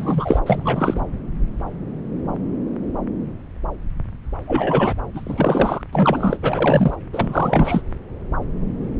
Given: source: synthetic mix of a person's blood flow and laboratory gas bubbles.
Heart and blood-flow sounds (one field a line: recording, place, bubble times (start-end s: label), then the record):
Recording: Doppler ultrasound of blood flow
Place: subclavian vein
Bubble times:
0.00-0.40 s: bubbles
0.46-1.02 s: bubbles
4.47-4.95 s: bubbles
5.13-5.81 s: bubbles
5.93-6.37 s: bubbles
6.42-6.97 s: bubbles
7.13-7.81 s: bubbles
From the record:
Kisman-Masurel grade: 332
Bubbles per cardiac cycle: rolling drumbeat, 9 or more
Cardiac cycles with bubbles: 50 to 99%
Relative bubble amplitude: moderate (0.250 to 0.450)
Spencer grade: 3 (all of the cardiac periods contain showers or single bubble signals, but not dominating or overriding the cardiac motion signals)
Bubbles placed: anywhere in the cardiac cycle